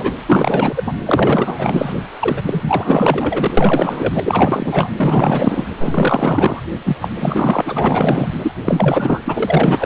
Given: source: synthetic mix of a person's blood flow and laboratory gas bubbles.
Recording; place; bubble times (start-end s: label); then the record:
Doppler ultrasound of blood flow; precordium
0.00-0.18 s: bubbles
0.27-0.94 s: bubbles
1.05-1.92 s: bubbles
2.19-2.42 s: bubbles
2.46-3.54 s: bubbles
3.57-4.20 s: bubbles
4.25-4.93 s: bubbles
4.97-5.65 s: bubbles
5.79-6.60 s: bubbles
6.85-6.97 s: bubbles
7.02-7.11 s: bubbles
7.15-7.62 s: bubbles
7.64-8.27 s: bubbles
8.42-8.52 s: bubbles
8.64-9.21 s: bubbles
9.25-9.86 s: bubbles
From the record:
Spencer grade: 4 (maximum detectable bubble signal sounding continuously throughout systole and diastole of every cardiac period, and overriding the amplitude of the normal cardiac signals); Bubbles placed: anywhere in the cardiac cycle